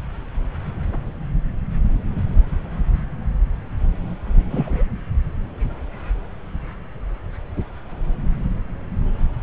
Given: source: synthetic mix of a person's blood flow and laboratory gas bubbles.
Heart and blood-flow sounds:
Doppler ultrasound of blood flow; subclavian vein
4.50-4.84 s: bubbles
From the record:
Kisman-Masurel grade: 113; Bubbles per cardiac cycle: 1 to 2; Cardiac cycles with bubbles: 1 to 10%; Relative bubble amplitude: loud (0.450 to 0.775); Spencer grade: 1 (occasional bubble signal discernible with the cardiac motion signal, with majority of cardiac periods free of bubbles); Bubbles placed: anywhere in the cardiac cycle

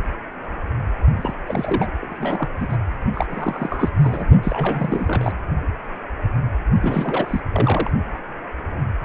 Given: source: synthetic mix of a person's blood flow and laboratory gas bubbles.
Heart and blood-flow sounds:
Doppler ultrasound of blood flow; precordium
1.16-1.34 s: bubbles
1.47-1.89 s: bubbles
2.01-2.07 s: bubbles
2.09-2.49 s: bubbles
2.59-2.78 s: bubbles
3.13-3.26 s: bubbles
3.29-3.91 s: bubbles
4.02-4.25 s: bubbles
4.42-5.38 s: bubbles
6.81-7.41 s: bubbles
7.52-7.91 s: bubbles
From the record:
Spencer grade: 3 (all of the cardiac periods contain showers or single bubble signals, but not dominating or overriding the cardiac motion signals); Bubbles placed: only in the low amplitude regions of the cardiac cycle

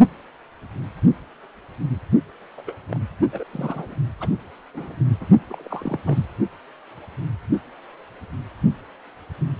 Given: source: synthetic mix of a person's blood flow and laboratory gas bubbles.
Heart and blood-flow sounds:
Doppler ultrasound of blood flow; precordium
2.58-2.62 s: bubbles
2.67-2.75 s: bubbles
2.90-3.00 s: bubbles
3.33-3.44 s: bubbles
3.52-3.95 s: bubbles
4.21-4.29 s: bubbles
4.75-4.95 s: bubbles
5.21-5.29 s: bubbles
5.49-5.67 s: bubbles
5.70-6.00 s: bubbles
6.05-6.25 s: bubbles
From the record:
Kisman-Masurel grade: 221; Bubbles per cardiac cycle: several, 3 to 8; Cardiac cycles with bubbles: 10 to 50%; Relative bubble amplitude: barely perceptible (0.100 to 0.250); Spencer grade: 2 (many but less than half of the cardiac periods contain bubble signals, singularly or in groups); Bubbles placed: only in the low amplitude regions of the cardiac cycle

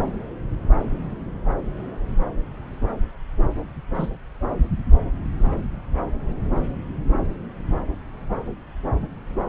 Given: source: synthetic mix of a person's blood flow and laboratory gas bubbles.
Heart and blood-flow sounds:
Doppler ultrasound of blood flow; subclavian vein
3.94-4.10 s: bubbles
From the record:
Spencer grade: 1 (occasional bubble signal discernible with the cardiac motion signal, with majority of cardiac periods free of bubbles); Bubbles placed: anywhere in the cardiac cycle

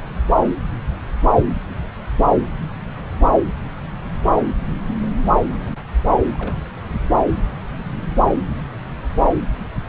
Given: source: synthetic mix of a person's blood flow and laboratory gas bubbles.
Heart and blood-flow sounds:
Doppler ultrasound of blood flow; subclavian vein
6.33-6.62 s: bubbles
6.72-6.79 s: bubbles
9.59-9.69 s: bubbles
9.86-9.89 s: bubbles
From the record:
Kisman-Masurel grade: 221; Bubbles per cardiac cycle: several, 3 to 8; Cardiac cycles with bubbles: 10 to 50%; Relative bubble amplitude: barely perceptible (0.100 to 0.250); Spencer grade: 2 (many but less than half of the cardiac periods contain bubble signals, singularly or in groups); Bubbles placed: anywhere in the cardiac cycle

